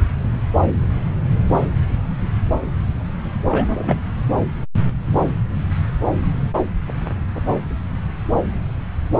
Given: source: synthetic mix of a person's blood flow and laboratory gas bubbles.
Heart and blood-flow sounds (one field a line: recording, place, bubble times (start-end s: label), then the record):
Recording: Doppler ultrasound of blood flow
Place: subclavian vein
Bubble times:
3.50-4.01 s: bubbles
From the record:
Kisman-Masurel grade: 212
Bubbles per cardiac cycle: several, 3 to 8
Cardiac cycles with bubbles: 1 to 10%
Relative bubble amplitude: moderate (0.250 to 0.450)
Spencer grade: 1 (occasional bubble signal discernible with the cardiac motion signal, with majority of cardiac periods free of bubbles)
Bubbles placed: anywhere in the cardiac cycle